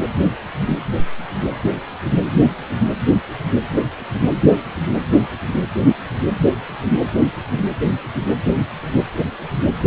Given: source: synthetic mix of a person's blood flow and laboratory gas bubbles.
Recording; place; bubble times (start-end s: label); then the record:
Doppler ultrasound of blood flow; precordium
no bubbles
From the record:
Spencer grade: 0 (complete lack of bubble signals)